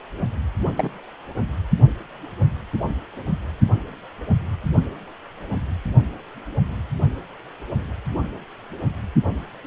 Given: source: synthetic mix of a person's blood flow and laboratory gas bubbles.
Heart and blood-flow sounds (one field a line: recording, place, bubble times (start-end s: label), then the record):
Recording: Doppler ultrasound of blood flow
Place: precordium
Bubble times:
0.76-0.90 s: bubbles
From the record:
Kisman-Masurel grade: 112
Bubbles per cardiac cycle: 1 to 2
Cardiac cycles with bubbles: 1 to 10%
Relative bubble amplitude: moderate (0.250 to 0.450)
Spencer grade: 1 (occasional bubble signal discernible with the cardiac motion signal, with majority of cardiac periods free of bubbles)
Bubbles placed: anywhere in the cardiac cycle